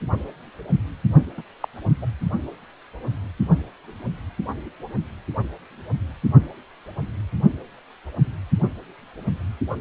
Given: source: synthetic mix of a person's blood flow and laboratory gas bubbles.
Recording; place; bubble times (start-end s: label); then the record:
Doppler ultrasound of blood flow; precordium
1.37-1.42 s: bubbles
1.60-1.68 s: bubbles
2.02-2.06 s: bubbles
From the record:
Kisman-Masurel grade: 222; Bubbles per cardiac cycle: several, 3 to 8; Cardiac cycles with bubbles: 10 to 50%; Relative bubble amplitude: moderate (0.250 to 0.450); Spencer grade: 2 (many but less than half of the cardiac periods contain bubble signals, singularly or in groups); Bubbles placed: only in the low amplitude regions of the cardiac cycle